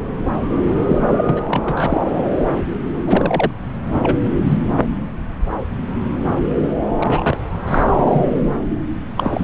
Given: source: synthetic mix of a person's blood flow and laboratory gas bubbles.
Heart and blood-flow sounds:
Doppler ultrasound of blood flow; subclavian vein
0.88-1.01 s: bubbles
1.08-1.43 s: bubbles
1.48-2.25 s: bubbles
3.06-3.52 s: bubbles
3.93-4.17 s: bubbles
4.24-4.30 s: bubbles
4.45-4.58 s: bubbles
6.58-6.68 s: bubbles
6.99-7.37 s: bubbles
7.67-7.84 s: bubbles
7.88-8.26 s: bubbles
8.35-8.41 s: bubbles
9.16-9.44 s: bubbles
From the record:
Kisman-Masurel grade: 332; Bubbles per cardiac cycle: rolling drumbeat, 9 or more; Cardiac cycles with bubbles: 50 to 99%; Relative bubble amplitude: moderate (0.250 to 0.450); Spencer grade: 3 (all of the cardiac periods contain showers or single bubble signals, but not dominating or overriding the cardiac motion signals); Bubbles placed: anywhere in the cardiac cycle

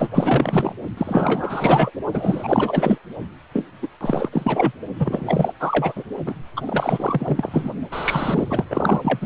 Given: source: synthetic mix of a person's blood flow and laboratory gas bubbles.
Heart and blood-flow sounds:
Doppler ultrasound of blood flow; precordium
0.00-0.09 s: bubbles
0.15-0.73 s: bubbles
0.97-1.91 s: bubbles
2.13-2.98 s: bubbles
3.53-3.65 s: bubbles
3.82-3.88 s: bubbles
4.00-4.29 s: bubbles
4.31-4.72 s: bubbles
4.99-5.52 s: bubbles
5.59-5.93 s: bubbles
5.96-6.04 s: bubbles
6.26-6.34 s: bubbles
6.56-6.62 s: bubbles
6.67-7.72 s: bubbles
7.91-8.64 s: bubbles
8.70-9.26 s: bubbles
From the record:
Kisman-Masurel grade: 444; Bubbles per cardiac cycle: continuous sound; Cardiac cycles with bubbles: 100%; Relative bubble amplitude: maximal (0.775 to 0.999); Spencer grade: 4 (maximum detectable bubble signal sounding continuously throughout systole and diastole of every cardiac period, and overriding the amplitude of the normal cardiac signals); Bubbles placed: only in the low amplitude regions of the cardiac cycle

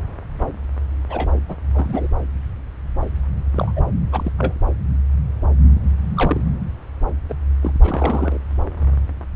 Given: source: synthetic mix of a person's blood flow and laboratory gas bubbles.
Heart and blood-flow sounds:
Doppler ultrasound of blood flow; subclavian vein
1.10-1.31 s: bubbles
1.48-1.56 s: bubbles
1.74-2.08 s: bubbles
3.56-3.72 s: bubbles
3.75-3.82 s: bubbles
4.12-4.32 s: bubbles
4.38-4.53 s: bubbles
6.17-6.41 s: bubbles
7.29-7.34 s: bubbles
7.63-7.73 s: bubbles
7.83-8.38 s: bubbles
From the record:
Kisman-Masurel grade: 222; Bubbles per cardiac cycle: several, 3 to 8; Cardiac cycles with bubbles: 10 to 50%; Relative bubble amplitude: moderate (0.250 to 0.450); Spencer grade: 2 (many but less than half of the cardiac periods contain bubble signals, singularly or in groups); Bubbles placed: anywhere in the cardiac cycle

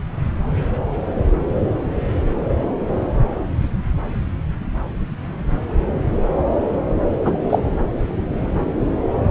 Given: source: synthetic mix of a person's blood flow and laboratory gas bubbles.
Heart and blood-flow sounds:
Doppler ultrasound of blood flow; subclavian vein
7.25-7.33 s: bubbles
7.50-7.59 s: bubbles
From the record:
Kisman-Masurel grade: 113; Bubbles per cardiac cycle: 1 to 2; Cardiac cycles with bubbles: 1 to 10%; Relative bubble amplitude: loud (0.450 to 0.775); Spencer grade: 1 (occasional bubble signal discernible with the cardiac motion signal, with majority of cardiac periods free of bubbles); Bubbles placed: anywhere in the cardiac cycle

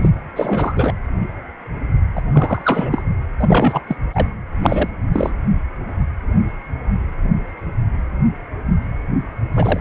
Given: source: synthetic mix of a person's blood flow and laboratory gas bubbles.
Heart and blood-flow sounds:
Doppler ultrasound of blood flow; precordium
0.01-0.10 s: bubbles
0.35-0.93 s: bubbles
2.15-2.22 s: bubbles
2.32-3.03 s: bubbles
3.40-3.81 s: bubbles
3.87-3.96 s: bubbles
4.12-4.28 s: bubbles
4.62-4.89 s: bubbles
5.12-5.33 s: bubbles
9.54-9.80 s: bubbles
From the record:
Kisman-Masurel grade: 333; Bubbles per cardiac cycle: rolling drumbeat, 9 or more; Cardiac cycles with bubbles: 50 to 99%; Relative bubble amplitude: loud (0.450 to 0.775); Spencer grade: 3 (all of the cardiac periods contain showers or single bubble signals, but not dominating or overriding the cardiac motion signals); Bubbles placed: anywhere in the cardiac cycle

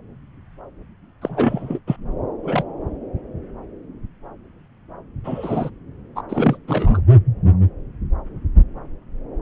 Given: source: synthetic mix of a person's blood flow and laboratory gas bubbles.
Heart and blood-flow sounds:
Doppler ultrasound of blood flow; subclavian vein
1.22-1.79 s: bubbles
1.87-1.97 s: bubbles
2.43-2.63 s: bubbles
5.24-5.70 s: bubbles
6.16-6.21 s: bubbles
6.29-6.58 s: bubbles
6.68-7.01 s: bubbles
From the record:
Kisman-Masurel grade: 222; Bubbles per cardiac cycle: several, 3 to 8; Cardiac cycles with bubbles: 10 to 50%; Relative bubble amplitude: moderate (0.250 to 0.450); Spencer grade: 2 (many but less than half of the cardiac periods contain bubble signals, singularly or in groups); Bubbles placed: anywhere in the cardiac cycle

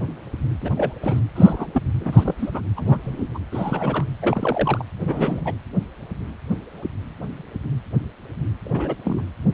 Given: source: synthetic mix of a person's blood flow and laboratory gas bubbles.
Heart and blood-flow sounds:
Doppler ultrasound of blood flow; precordium
0.62-0.70 s: bubbles
0.77-0.93 s: bubbles
1.02-1.20 s: bubbles
1.35-1.67 s: bubbles
1.73-1.82 s: bubbles
2.00-2.34 s: bubbles
2.38-2.60 s: bubbles
2.77-3.00 s: bubbles
3.04-3.27 s: bubbles
3.34-3.38 s: bubbles
3.52-4.04 s: bubbles
4.22-4.85 s: bubbles
5.04-5.54 s: bubbles
8.65-8.96 s: bubbles
9.04-9.24 s: bubbles
From the record:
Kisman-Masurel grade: 232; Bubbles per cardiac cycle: several, 3 to 8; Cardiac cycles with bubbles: 50 to 99%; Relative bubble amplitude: moderate (0.250 to 0.450); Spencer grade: 3 (all of the cardiac periods contain showers or single bubble signals, but not dominating or overriding the cardiac motion signals); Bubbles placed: anywhere in the cardiac cycle

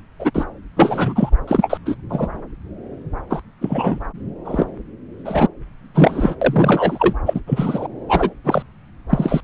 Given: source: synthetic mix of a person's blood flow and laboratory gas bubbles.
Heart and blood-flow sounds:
Doppler ultrasound of blood flow; subclavian vein
0.19-0.31 s: bubbles
0.34-0.46 s: bubbles
0.76-1.29 s: bubbles
1.48-1.77 s: bubbles
1.85-1.96 s: bubbles
2.09-2.28 s: bubbles
3.30-3.42 s: bubbles
3.61-4.00 s: bubbles
4.45-4.65 s: bubbles
5.25-5.47 s: bubbles
5.94-6.35 s: bubbles
6.41-7.14 s: bubbles
7.26-7.41 s: bubbles
7.47-7.88 s: bubbles
8.08-8.30 s: bubbles
8.44-8.62 s: bubbles
9.10-9.41 s: bubbles
From the record:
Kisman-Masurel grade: 243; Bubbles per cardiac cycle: several, 3 to 8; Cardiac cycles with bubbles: 100%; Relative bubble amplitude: loud (0.450 to 0.775); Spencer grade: 3 (all of the cardiac periods contain showers or single bubble signals, but not dominating or overriding the cardiac motion signals); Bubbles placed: anywhere in the cardiac cycle

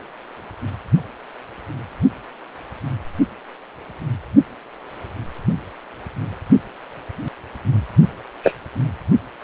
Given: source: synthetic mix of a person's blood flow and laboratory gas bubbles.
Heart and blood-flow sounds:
Doppler ultrasound of blood flow; precordium
8.43-8.54 s: bubbles
From the record:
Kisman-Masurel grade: 113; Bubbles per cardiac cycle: 1 to 2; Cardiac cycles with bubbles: 1 to 10%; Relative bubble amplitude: loud (0.450 to 0.775); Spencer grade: 1 (occasional bubble signal discernible with the cardiac motion signal, with majority of cardiac periods free of bubbles); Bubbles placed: only in the low amplitude regions of the cardiac cycle

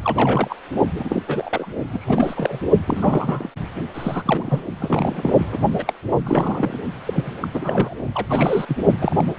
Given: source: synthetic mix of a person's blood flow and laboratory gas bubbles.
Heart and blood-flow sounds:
Doppler ultrasound of blood flow; precordium
0.04-0.56 s: bubbles
0.95-1.23 s: bubbles
1.27-1.67 s: bubbles
1.88-2.59 s: bubbles
2.86-3.50 s: bubbles
3.94-4.61 s: bubbles
4.79-5.34 s: bubbles
5.38-5.58 s: bubbles
5.78-5.84 s: bubbles
5.87-5.94 s: bubbles
6.25-6.78 s: bubbles
7.06-7.32 s: bubbles
7.42-7.48 s: bubbles
7.54-7.95 s: bubbles
8.14-8.27 s: bubbles
8.29-8.66 s: bubbles
8.68-8.77 s: bubbles
9.00-9.25 s: bubbles
From the record:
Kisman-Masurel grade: 342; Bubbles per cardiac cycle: rolling drumbeat, 9 or more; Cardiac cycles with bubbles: 100%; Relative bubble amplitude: moderate (0.250 to 0.450); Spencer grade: 3 (all of the cardiac periods contain showers or single bubble signals, but not dominating or overriding the cardiac motion signals); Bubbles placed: only in the low amplitude regions of the cardiac cycle

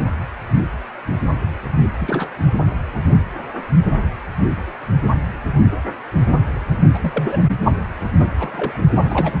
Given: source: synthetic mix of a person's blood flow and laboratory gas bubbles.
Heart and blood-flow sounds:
Doppler ultrasound of blood flow; precordium
2.00-2.31 s: bubbles
6.94-6.98 s: bubbles
7.01-7.11 s: bubbles
7.14-7.45 s: bubbles
8.39-8.78 s: bubbles
8.99-9.33 s: bubbles
From the record:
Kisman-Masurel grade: 221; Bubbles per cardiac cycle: several, 3 to 8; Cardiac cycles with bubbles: 10 to 50%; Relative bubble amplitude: barely perceptible (0.100 to 0.250); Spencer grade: 2 (many but less than half of the cardiac periods contain bubble signals, singularly or in groups); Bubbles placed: anywhere in the cardiac cycle

